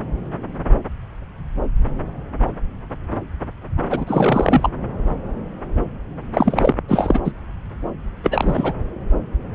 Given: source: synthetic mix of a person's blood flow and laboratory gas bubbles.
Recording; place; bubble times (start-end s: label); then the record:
Doppler ultrasound of blood flow; subclavian vein
3.90-4.69 s: bubbles
6.33-6.74 s: bubbles
6.88-7.20 s: bubbles
7.25-7.32 s: bubbles
8.23-8.73 s: bubbles
From the record:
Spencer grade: 2 (many but less than half of the cardiac periods contain bubble signals, singularly or in groups); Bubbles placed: anywhere in the cardiac cycle